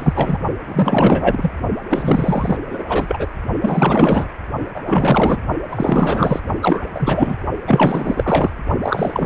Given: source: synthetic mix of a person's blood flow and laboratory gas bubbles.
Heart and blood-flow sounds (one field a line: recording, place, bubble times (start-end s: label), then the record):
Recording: Doppler ultrasound of blood flow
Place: precordium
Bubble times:
0.00-0.38 s: bubbles
0.65-1.51 s: bubbles
1.89-2.57 s: bubbles
2.69-2.84 s: bubbles
2.89-3.27 s: bubbles
3.62-4.29 s: bubbles
4.75-4.83 s: bubbles
4.87-5.40 s: bubbles
5.68-6.40 s: bubbles
6.62-7.37 s: bubbles
7.67-8.50 s: bubbles
8.82-9.26 s: bubbles
From the record:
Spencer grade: 4 (maximum detectable bubble signal sounding continuously throughout systole and diastole of every cardiac period, and overriding the amplitude of the normal cardiac signals)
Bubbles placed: only in the low amplitude regions of the cardiac cycle